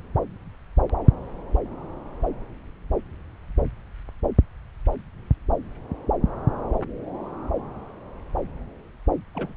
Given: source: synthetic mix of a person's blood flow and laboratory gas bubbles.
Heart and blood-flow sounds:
Doppler ultrasound of blood flow; subclavian vein
9.34-9.54 s: bubbles
From the record:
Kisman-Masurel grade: 211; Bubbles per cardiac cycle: several, 3 to 8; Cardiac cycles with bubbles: 1 to 10%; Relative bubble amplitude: barely perceptible (0.100 to 0.250); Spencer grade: 1 (occasional bubble signal discernible with the cardiac motion signal, with majority of cardiac periods free of bubbles); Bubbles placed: anywhere in the cardiac cycle

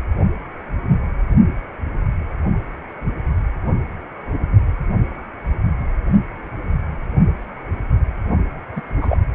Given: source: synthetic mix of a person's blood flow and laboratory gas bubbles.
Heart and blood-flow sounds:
Doppler ultrasound of blood flow; precordium
8.76-8.81 s: bubbles
9.01-9.18 s: bubbles
From the record:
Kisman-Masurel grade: 212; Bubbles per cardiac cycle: several, 3 to 8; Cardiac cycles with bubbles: 1 to 10%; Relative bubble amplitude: moderate (0.250 to 0.450); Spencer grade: 1 (occasional bubble signal discernible with the cardiac motion signal, with majority of cardiac periods free of bubbles); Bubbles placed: only in the low amplitude regions of the cardiac cycle

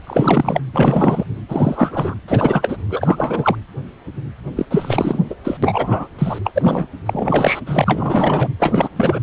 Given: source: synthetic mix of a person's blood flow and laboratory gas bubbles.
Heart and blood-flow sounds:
Doppler ultrasound of blood flow; precordium
0.03-0.60 s: bubbles
0.73-1.24 s: bubbles
1.48-2.15 s: bubbles
2.28-2.77 s: bubbles
2.90-3.55 s: bubbles
4.56-4.66 s: bubbles
4.71-5.20 s: bubbles
5.29-5.35 s: bubbles
5.43-5.57 s: bubbles
5.62-6.08 s: bubbles
6.18-6.38 s: bubbles
6.45-6.51 s: bubbles
6.54-6.86 s: bubbles
7.05-7.60 s: bubbles
7.66-8.49 s: bubbles
8.59-8.89 s: bubbles
8.96-9.20 s: bubbles
From the record:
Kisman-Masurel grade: 333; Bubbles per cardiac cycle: rolling drumbeat, 9 or more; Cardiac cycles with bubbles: 50 to 99%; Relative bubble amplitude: loud (0.450 to 0.775); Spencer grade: 3 (all of the cardiac periods contain showers or single bubble signals, but not dominating or overriding the cardiac motion signals); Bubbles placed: anywhere in the cardiac cycle

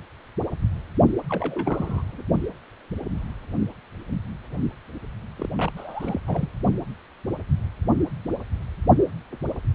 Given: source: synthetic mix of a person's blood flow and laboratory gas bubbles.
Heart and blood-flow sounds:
Doppler ultrasound of blood flow; precordium
1.29-2.02 s: bubbles
2.12-2.23 s: bubbles
5.39-5.49 s: bubbles
5.58-5.71 s: bubbles
5.77-6.20 s: bubbles
6.27-6.48 s: bubbles
From the record:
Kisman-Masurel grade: 221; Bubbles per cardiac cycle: several, 3 to 8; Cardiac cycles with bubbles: 10 to 50%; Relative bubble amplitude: barely perceptible (0.100 to 0.250); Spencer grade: 2 (many but less than half of the cardiac periods contain bubble signals, singularly or in groups); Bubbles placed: only in the low amplitude regions of the cardiac cycle

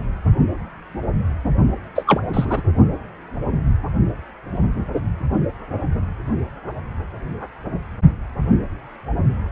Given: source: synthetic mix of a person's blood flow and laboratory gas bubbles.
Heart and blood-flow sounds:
Doppler ultrasound of blood flow; precordium
1.95-2.21 s: bubbles
2.33-2.61 s: bubbles
From the record:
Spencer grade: 2 (many but less than half of the cardiac periods contain bubble signals, singularly or in groups); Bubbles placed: only in the low amplitude regions of the cardiac cycle

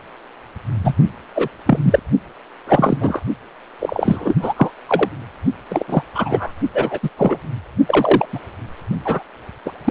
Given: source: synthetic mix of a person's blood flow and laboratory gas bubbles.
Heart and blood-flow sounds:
Doppler ultrasound of blood flow; precordium
0.83-0.94 s: bubbles
1.35-1.48 s: bubbles
1.66-1.79 s: bubbles
1.82-1.99 s: bubbles
2.67-2.97 s: bubbles
3.01-3.22 s: bubbles
3.80-4.36 s: bubbles
4.42-4.53 s: bubbles
4.57-4.71 s: bubbles
4.87-5.08 s: bubbles
5.69-5.84 s: bubbles
5.88-6.03 s: bubbles
6.15-6.52 s: bubbles
6.74-6.99 s: bubbles
7.03-7.10 s: bubbles
7.17-7.39 s: bubbles
7.87-8.26 s: bubbles
8.33-8.39 s: bubbles
9.04-9.22 s: bubbles
9.65-9.72 s: bubbles
9.85-9.91 s: bubbles
From the record:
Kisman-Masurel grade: 243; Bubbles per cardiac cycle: several, 3 to 8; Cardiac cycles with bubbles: 100%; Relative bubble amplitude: loud (0.450 to 0.775); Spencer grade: 3 (all of the cardiac periods contain showers or single bubble signals, but not dominating or overriding the cardiac motion signals); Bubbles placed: only in the low amplitude regions of the cardiac cycle

